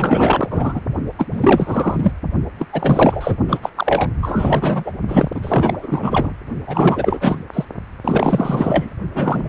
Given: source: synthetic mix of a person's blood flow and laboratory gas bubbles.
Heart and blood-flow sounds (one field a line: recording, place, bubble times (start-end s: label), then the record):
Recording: Doppler ultrasound of blood flow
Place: precordium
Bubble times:
0.00-0.81 s: bubbles
1.18-1.27 s: bubbles
1.32-2.11 s: bubbles
2.58-2.67 s: bubbles
2.73-3.36 s: bubbles
3.48-3.71 s: bubbles
3.75-4.10 s: bubbles
4.21-4.92 s: bubbles
5.08-5.29 s: bubbles
5.34-6.33 s: bubbles
6.66-7.39 s: bubbles
7.53-7.65 s: bubbles
8.04-8.95 s: bubbles
9.14-9.49 s: bubbles
From the record:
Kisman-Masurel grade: 444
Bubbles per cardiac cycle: continuous sound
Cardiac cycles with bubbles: 100%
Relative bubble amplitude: maximal (0.775 to 0.999)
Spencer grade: 4 (maximum detectable bubble signal sounding continuously throughout systole and diastole of every cardiac period, and overriding the amplitude of the normal cardiac signals)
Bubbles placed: only in the low amplitude regions of the cardiac cycle